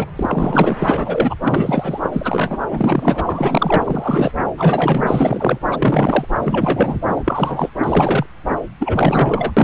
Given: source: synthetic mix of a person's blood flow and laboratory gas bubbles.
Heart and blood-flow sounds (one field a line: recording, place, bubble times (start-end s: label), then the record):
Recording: Doppler ultrasound of blood flow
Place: subclavian vein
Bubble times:
0.00-0.06 s: bubbles
0.15-0.76 s: bubbles
0.80-1.34 s: bubbles
1.42-2.00 s: bubbles
2.02-2.58 s: bubbles
2.70-4.32 s: bubbles
4.58-5.59 s: bubbles
5.70-6.25 s: bubbles
6.40-6.98 s: bubbles
7.07-7.23 s: bubbles
7.26-7.69 s: bubbles
7.83-8.27 s: bubbles
8.79-9.52 s: bubbles
9.56-9.64 s: bubbles
From the record:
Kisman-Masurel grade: 343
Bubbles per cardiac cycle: rolling drumbeat, 9 or more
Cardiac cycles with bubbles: 100%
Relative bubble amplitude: loud (0.450 to 0.775)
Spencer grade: 3 (all of the cardiac periods contain showers or single bubble signals, but not dominating or overriding the cardiac motion signals)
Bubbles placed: anywhere in the cardiac cycle